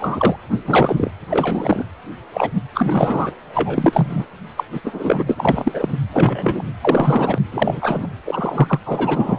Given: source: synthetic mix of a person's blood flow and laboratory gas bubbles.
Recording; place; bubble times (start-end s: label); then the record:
Doppler ultrasound of blood flow; precordium
0.00-0.36 s: bubbles
0.67-1.11 s: bubbles
1.29-1.86 s: bubbles
2.33-2.51 s: bubbles
2.75-3.31 s: bubbles
3.54-4.25 s: bubbles
4.57-4.64 s: bubbles
4.72-4.81 s: bubbles
4.84-5.23 s: bubbles
5.26-5.97 s: bubbles
6.12-6.63 s: bubbles
6.81-7.38 s: bubbles
7.51-8.07 s: bubbles
8.25-8.79 s: bubbles
8.85-9.39 s: bubbles
From the record:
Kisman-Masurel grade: 243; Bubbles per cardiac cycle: several, 3 to 8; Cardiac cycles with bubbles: 100%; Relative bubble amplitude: loud (0.450 to 0.775); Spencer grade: 3 (all of the cardiac periods contain showers or single bubble signals, but not dominating or overriding the cardiac motion signals); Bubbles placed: anywhere in the cardiac cycle